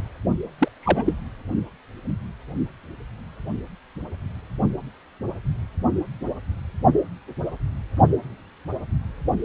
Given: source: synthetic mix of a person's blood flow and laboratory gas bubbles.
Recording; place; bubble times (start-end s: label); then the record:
Doppler ultrasound of blood flow; precordium
0.58-0.68 s: bubbles
0.81-1.14 s: bubbles
From the record:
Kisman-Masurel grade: 212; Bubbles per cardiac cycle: several, 3 to 8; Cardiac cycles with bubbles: 1 to 10%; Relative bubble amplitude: moderate (0.250 to 0.450); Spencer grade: 1 (occasional bubble signal discernible with the cardiac motion signal, with majority of cardiac periods free of bubbles); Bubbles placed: only in the low amplitude regions of the cardiac cycle